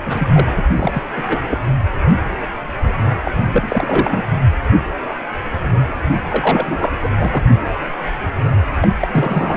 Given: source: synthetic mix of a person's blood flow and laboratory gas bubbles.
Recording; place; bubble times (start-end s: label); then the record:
Doppler ultrasound of blood flow; precordium
0.05-0.28 s: bubbles
0.32-0.52 s: bubbles
0.55-0.64 s: bubbles
0.78-1.03 s: bubbles
1.16-1.22 s: bubbles
1.27-1.39 s: bubbles
1.48-1.59 s: bubbles
3.24-3.31 s: bubbles
3.40-4.23 s: bubbles
6.29-6.92 s: bubbles
7.02-7.09 s: bubbles
7.18-7.42 s: bubbles
8.81-8.88 s: bubbles
9.00-9.08 s: bubbles
9.11-9.57 s: bubbles
From the record:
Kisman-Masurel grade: 232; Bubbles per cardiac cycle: several, 3 to 8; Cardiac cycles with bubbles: 50 to 99%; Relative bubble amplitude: moderate (0.250 to 0.450); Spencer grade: 3 (all of the cardiac periods contain showers or single bubble signals, but not dominating or overriding the cardiac motion signals); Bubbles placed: anywhere in the cardiac cycle